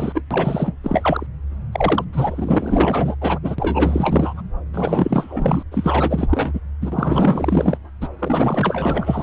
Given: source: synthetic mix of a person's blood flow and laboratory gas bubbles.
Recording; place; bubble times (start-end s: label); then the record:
Doppler ultrasound of blood flow; subclavian vein
0.00-0.21 s: bubbles
0.30-0.78 s: bubbles
0.83-1.27 s: bubbles
1.72-2.04 s: bubbles
2.12-3.15 s: bubbles
3.21-3.40 s: bubbles
3.42-3.55 s: bubbles
3.58-4.42 s: bubbles
4.74-5.63 s: bubbles
5.71-6.61 s: bubbles
6.81-7.77 s: bubbles
8.01-8.08 s: bubbles
8.18-9.23 s: bubbles
From the record:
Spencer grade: 4 (maximum detectable bubble signal sounding continuously throughout systole and diastole of every cardiac period, and overriding the amplitude of the normal cardiac signals); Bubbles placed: anywhere in the cardiac cycle